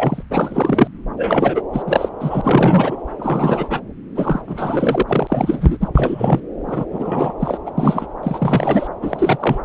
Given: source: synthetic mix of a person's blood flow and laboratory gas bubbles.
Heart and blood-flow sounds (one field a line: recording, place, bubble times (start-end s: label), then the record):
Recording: Doppler ultrasound of blood flow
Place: subclavian vein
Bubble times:
0.00-0.23 s: bubbles
0.30-0.88 s: bubbles
1.16-1.62 s: bubbles
1.73-1.83 s: bubbles
1.85-2.10 s: bubbles
2.20-2.97 s: bubbles
3.19-3.80 s: bubbles
4.15-4.42 s: bubbles
4.47-5.03 s: bubbles
5.08-5.77 s: bubbles
5.82-5.88 s: bubbles
5.94-6.40 s: bubbles
6.67-6.85 s: bubbles
6.92-7.33 s: bubbles
7.39-7.58 s: bubbles
7.66-7.72 s: bubbles
7.77-8.07 s: bubbles
8.23-8.88 s: bubbles
9.01-9.59 s: bubbles
From the record:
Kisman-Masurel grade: 343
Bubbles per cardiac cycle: rolling drumbeat, 9 or more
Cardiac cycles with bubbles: 100%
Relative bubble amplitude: loud (0.450 to 0.775)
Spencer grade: 3 (all of the cardiac periods contain showers or single bubble signals, but not dominating or overriding the cardiac motion signals)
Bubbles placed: anywhere in the cardiac cycle